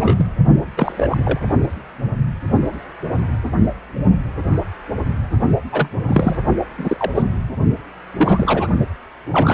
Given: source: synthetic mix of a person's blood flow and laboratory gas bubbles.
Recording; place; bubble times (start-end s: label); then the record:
Doppler ultrasound of blood flow; precordium
0.00-0.27 s: bubbles
0.76-1.18 s: bubbles
1.23-1.40 s: bubbles
5.71-5.88 s: bubbles
6.08-6.37 s: bubbles
6.78-7.11 s: bubbles
7.15-7.23 s: bubbles
8.16-8.67 s: bubbles
9.30-9.54 s: bubbles
From the record:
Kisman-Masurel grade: 232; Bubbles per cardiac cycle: several, 3 to 8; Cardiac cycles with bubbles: 50 to 99%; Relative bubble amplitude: moderate (0.250 to 0.450); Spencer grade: 3 (all of the cardiac periods contain showers or single bubble signals, but not dominating or overriding the cardiac motion signals); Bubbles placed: only in the low amplitude regions of the cardiac cycle